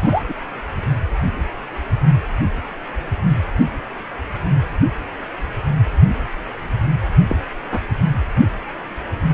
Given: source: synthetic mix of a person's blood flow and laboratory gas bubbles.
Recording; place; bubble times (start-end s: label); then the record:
Doppler ultrasound of blood flow; precordium
0.02-0.23 s: bubbles
0.28-0.34 s: bubbles
7.29-7.36 s: bubbles
7.71-7.80 s: bubbles
From the record:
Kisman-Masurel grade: 122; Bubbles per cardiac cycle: 1 to 2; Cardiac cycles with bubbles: 10 to 50%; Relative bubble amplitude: moderate (0.250 to 0.450); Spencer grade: 2 (many but less than half of the cardiac periods contain bubble signals, singularly or in groups); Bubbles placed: anywhere in the cardiac cycle